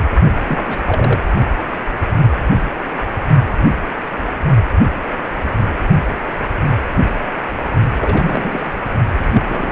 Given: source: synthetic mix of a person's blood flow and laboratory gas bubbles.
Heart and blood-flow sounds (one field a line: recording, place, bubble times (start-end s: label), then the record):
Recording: Doppler ultrasound of blood flow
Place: precordium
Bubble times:
0.46-0.82 s: bubbles
0.86-1.21 s: bubbles
8.00-8.76 s: bubbles
9.19-9.43 s: bubbles
9.49-9.72 s: bubbles
From the record:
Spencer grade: 2 (many but less than half of the cardiac periods contain bubble signals, singularly or in groups)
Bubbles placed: only in the low amplitude regions of the cardiac cycle